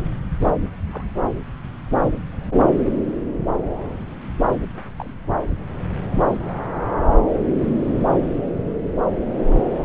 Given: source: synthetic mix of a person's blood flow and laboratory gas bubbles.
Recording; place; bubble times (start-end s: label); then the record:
Doppler ultrasound of blood flow; subclavian vein
0.91-1.04 s: bubbles
4.97-5.15 s: bubbles
5.25-5.36 s: bubbles
From the record:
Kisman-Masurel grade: 121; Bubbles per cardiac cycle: 1 to 2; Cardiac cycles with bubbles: 10 to 50%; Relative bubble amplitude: barely perceptible (0.100 to 0.250); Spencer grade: 2 (many but less than half of the cardiac periods contain bubble signals, singularly or in groups); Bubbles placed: anywhere in the cardiac cycle